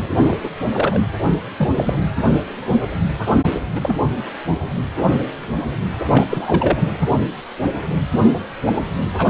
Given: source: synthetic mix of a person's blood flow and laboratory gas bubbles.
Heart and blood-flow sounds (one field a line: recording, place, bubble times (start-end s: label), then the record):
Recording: Doppler ultrasound of blood flow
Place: precordium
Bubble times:
0.22-0.49 s: bubbles
0.71-1.02 s: bubbles
1.56-1.99 s: bubbles
3.73-3.97 s: bubbles
6.09-6.26 s: bubbles
6.30-6.89 s: bubbles
9.17-9.30 s: bubbles
From the record:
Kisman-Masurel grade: 233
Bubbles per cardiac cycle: several, 3 to 8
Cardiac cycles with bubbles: 50 to 99%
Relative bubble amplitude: loud (0.450 to 0.775)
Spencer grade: 3 (all of the cardiac periods contain showers or single bubble signals, but not dominating or overriding the cardiac motion signals)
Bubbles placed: anywhere in the cardiac cycle